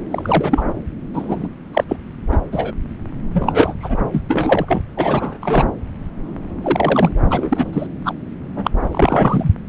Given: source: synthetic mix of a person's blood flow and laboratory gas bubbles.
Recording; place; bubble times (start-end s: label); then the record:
Doppler ultrasound of blood flow; subclavian vein
0.11-0.63 s: bubbles
1.14-1.48 s: bubbles
1.73-1.84 s: bubbles
1.89-1.96 s: bubbles
2.31-2.38 s: bubbles
2.52-2.72 s: bubbles
3.32-3.74 s: bubbles
3.80-3.98 s: bubbles
4.12-4.21 s: bubbles
4.29-4.82 s: bubbles
4.97-5.39 s: bubbles
5.42-5.65 s: bubbles
6.62-7.12 s: bubbles
7.30-7.87 s: bubbles
8.04-8.13 s: bubbles
8.55-8.71 s: bubbles
8.91-9.51 s: bubbles
From the record:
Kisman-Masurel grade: 233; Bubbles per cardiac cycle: several, 3 to 8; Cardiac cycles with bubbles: 50 to 99%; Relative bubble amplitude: loud (0.450 to 0.775); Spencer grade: 3 (all of the cardiac periods contain showers or single bubble signals, but not dominating or overriding the cardiac motion signals); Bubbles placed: anywhere in the cardiac cycle